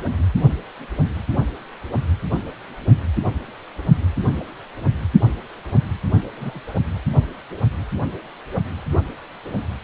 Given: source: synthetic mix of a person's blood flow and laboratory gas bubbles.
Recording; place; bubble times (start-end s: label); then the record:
Doppler ultrasound of blood flow; precordium
6.35-6.61 s: bubbles
From the record:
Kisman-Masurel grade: 111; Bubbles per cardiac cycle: 1 to 2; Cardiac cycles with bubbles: 1 to 10%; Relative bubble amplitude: barely perceptible (0.100 to 0.250); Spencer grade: 1 (occasional bubble signal discernible with the cardiac motion signal, with majority of cardiac periods free of bubbles); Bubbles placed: only in the low amplitude regions of the cardiac cycle